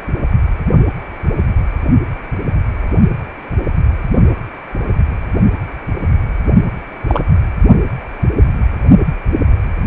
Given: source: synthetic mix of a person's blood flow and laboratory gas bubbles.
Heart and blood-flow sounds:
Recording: Doppler ultrasound of blood flow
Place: precordium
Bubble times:
7.07-7.26 s: bubbles
From the record:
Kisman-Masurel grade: 113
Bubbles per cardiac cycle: 1 to 2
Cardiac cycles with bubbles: 1 to 10%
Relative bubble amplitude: loud (0.450 to 0.775)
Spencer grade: 1 (occasional bubble signal discernible with the cardiac motion signal, with majority of cardiac periods free of bubbles)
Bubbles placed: only in the low amplitude regions of the cardiac cycle

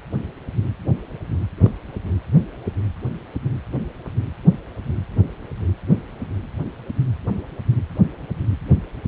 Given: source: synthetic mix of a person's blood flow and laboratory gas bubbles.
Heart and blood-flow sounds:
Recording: Doppler ultrasound of blood flow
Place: precordium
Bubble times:
1.64-1.72 s: bubbles
From the record:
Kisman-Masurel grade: 121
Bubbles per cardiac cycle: 1 to 2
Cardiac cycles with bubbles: 10 to 50%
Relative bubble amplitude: barely perceptible (0.100 to 0.250)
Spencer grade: 2 (many but less than half of the cardiac periods contain bubble signals, singularly or in groups)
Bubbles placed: anywhere in the cardiac cycle

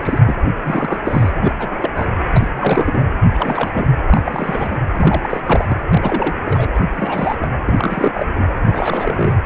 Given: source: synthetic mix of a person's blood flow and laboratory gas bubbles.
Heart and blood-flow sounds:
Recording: Doppler ultrasound of blood flow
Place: precordium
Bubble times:
0.00-0.19 s: bubbles
0.26-0.35 s: bubbles
0.62-1.30 s: bubbles
1.41-1.53 s: bubbles
1.59-1.68 s: bubbles
1.71-1.91 s: bubbles
1.96-2.05 s: bubbles
2.36-2.49 s: bubbles
2.53-3.06 s: bubbles
3.22-3.71 s: bubbles
3.75-3.87 s: bubbles
4.07-4.22 s: bubbles
4.25-4.78 s: bubbles
4.94-5.41 s: bubbles
5.46-5.77 s: bubbles
5.93-6.35 s: bubbles
6.45-6.69 s: bubbles
6.95-7.36 s: bubbles
7.39-7.47 s: bubbles
7.66-7.73 s: bubbles
7.77-8.26 s: bubbles
8.35-8.50 s: bubbles
8.65-9.33 s: bubbles
From the record:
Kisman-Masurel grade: 342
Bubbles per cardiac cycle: rolling drumbeat, 9 or more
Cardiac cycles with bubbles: 100%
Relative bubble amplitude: moderate (0.250 to 0.450)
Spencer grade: 3 (all of the cardiac periods contain showers or single bubble signals, but not dominating or overriding the cardiac motion signals)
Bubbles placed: anywhere in the cardiac cycle

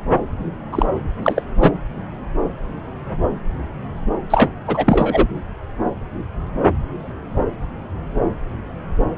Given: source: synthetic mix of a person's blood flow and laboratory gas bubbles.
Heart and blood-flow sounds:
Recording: Doppler ultrasound of blood flow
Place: subclavian vein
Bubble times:
0.72-0.86 s: bubbles
1.22-1.43 s: bubbles
1.60-1.71 s: bubbles
4.30-4.50 s: bubbles
4.67-5.27 s: bubbles
From the record:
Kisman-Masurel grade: 223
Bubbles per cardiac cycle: several, 3 to 8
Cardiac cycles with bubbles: 10 to 50%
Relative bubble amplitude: loud (0.450 to 0.775)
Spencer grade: 2 (many but less than half of the cardiac periods contain bubble signals, singularly or in groups)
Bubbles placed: anywhere in the cardiac cycle

